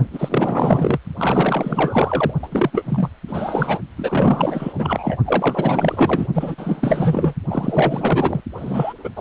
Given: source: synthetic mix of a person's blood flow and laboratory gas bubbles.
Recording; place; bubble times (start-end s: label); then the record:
Doppler ultrasound of blood flow; precordium
0.13-0.99 s: bubbles
1.17-2.33 s: bubbles
2.42-2.48 s: bubbles
2.51-2.70 s: bubbles
2.73-3.09 s: bubbles
3.27-3.79 s: bubbles
3.97-5.17 s: bubbles
5.26-6.27 s: bubbles
6.35-7.33 s: bubbles
7.50-8.41 s: bubbles
8.56-8.94 s: bubbles
8.97-9.11 s: bubbles
9.16-9.21 s: bubbles
From the record:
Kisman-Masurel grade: 444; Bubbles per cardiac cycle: continuous sound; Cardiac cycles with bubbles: 100%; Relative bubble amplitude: maximal (0.775 to 0.999); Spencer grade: 4 (maximum detectable bubble signal sounding continuously throughout systole and diastole of every cardiac period, and overriding the amplitude of the normal cardiac signals); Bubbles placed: only in the low amplitude regions of the cardiac cycle